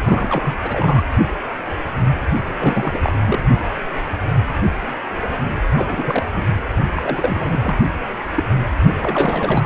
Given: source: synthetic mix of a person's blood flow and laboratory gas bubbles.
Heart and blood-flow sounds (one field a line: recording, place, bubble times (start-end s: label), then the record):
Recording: Doppler ultrasound of blood flow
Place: precordium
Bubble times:
0.04-0.58 s: bubbles
0.62-1.03 s: bubbles
2.59-3.00 s: bubbles
3.02-3.12 s: bubbles
3.25-3.39 s: bubbles
5.76-6.25 s: bubbles
6.35-6.46 s: bubbles
6.95-7.74 s: bubbles
8.35-8.44 s: bubbles
8.85-8.95 s: bubbles
8.97-9.66 s: bubbles
From the record:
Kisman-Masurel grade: 332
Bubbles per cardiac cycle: rolling drumbeat, 9 or more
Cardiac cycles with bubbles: 50 to 99%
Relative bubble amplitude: moderate (0.250 to 0.450)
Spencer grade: 3 (all of the cardiac periods contain showers or single bubble signals, but not dominating or overriding the cardiac motion signals)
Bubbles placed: anywhere in the cardiac cycle